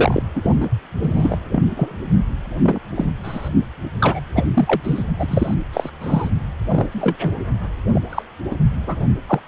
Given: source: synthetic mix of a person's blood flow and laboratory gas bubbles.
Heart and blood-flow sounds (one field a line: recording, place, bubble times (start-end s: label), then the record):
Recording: Doppler ultrasound of blood flow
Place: precordium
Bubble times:
0.00-0.23 s: bubbles
0.35-0.69 s: bubbles
1.02-1.36 s: bubbles
1.51-1.63 s: bubbles
1.76-1.97 s: bubbles
2.62-2.80 s: bubbles
2.96-3.08 s: bubbles
3.23-3.50 s: bubbles
3.98-4.21 s: bubbles
4.34-4.48 s: bubbles
4.54-5.04 s: bubbles
5.19-5.54 s: bubbles
5.73-5.89 s: bubbles
6.00-6.29 s: bubbles
6.67-6.88 s: bubbles
6.91-7.16 s: bubbles
7.21-7.41 s: bubbles
7.86-8.00 s: bubbles
8.10-8.23 s: bubbles
8.51-8.55 s: bubbles
8.87-8.96 s: bubbles
9.27-9.40 s: bubbles
From the record:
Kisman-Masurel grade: 243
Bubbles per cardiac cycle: several, 3 to 8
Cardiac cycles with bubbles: 100%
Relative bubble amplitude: loud (0.450 to 0.775)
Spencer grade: 3 (all of the cardiac periods contain showers or single bubble signals, but not dominating or overriding the cardiac motion signals)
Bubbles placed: only in the low amplitude regions of the cardiac cycle